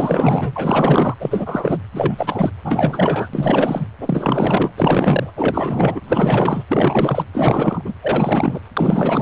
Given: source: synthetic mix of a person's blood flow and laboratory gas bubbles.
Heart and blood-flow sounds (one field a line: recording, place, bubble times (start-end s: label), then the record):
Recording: Doppler ultrasound of blood flow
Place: precordium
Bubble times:
0.00-0.53 s: bubbles
0.56-1.15 s: bubbles
1.19-1.78 s: bubbles
1.92-2.50 s: bubbles
2.64-3.27 s: bubbles
3.33-3.86 s: bubbles
4.00-4.71 s: bubbles
4.77-5.33 s: bubbles
5.37-6.00 s: bubbles
6.03-6.63 s: bubbles
6.69-7.24 s: bubbles
7.33-7.82 s: bubbles
7.84-7.93 s: bubbles
8.01-8.60 s: bubbles
8.76-9.22 s: bubbles
From the record:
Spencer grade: 4 (maximum detectable bubble signal sounding continuously throughout systole and diastole of every cardiac period, and overriding the amplitude of the normal cardiac signals)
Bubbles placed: anywhere in the cardiac cycle